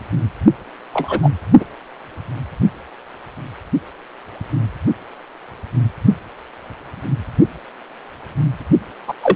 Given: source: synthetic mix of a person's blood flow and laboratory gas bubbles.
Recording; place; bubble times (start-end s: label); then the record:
Doppler ultrasound of blood flow; precordium
0.93-1.20 s: bubbles
1.22-1.30 s: bubbles
1.60-1.65 s: bubbles
9.07-9.13 s: bubbles
9.23-9.35 s: bubbles
From the record:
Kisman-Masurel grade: 123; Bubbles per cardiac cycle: 1 to 2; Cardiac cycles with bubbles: 10 to 50%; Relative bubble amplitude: loud (0.450 to 0.775); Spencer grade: 2 (many but less than half of the cardiac periods contain bubble signals, singularly or in groups); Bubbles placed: only in the low amplitude regions of the cardiac cycle